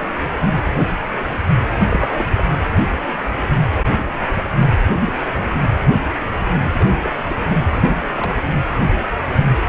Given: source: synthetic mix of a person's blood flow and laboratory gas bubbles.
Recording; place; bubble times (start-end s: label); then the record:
Doppler ultrasound of blood flow; precordium
1.89-2.11 s: bubbles
2.17-2.25 s: bubbles
2.35-2.49 s: bubbles
6.76-6.97 s: bubbles
7.02-7.10 s: bubbles
7.29-7.36 s: bubbles
7.39-7.56 s: bubbles
7.84-7.96 s: bubbles
8.17-8.34 s: bubbles
From the record:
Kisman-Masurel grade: 221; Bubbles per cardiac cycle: several, 3 to 8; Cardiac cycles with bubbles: 10 to 50%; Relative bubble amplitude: barely perceptible (0.100 to 0.250); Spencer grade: 2 (many but less than half of the cardiac periods contain bubble signals, singularly or in groups); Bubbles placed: anywhere in the cardiac cycle